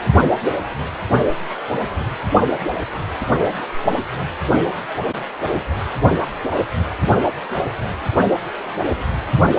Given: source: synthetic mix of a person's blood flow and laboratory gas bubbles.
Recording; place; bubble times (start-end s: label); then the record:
Doppler ultrasound of blood flow; precordium
no bubbles
From the record:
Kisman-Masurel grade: 000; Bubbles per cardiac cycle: 0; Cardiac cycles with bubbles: 0%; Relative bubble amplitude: no bubbles discernible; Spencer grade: 0 (complete lack of bubble signals)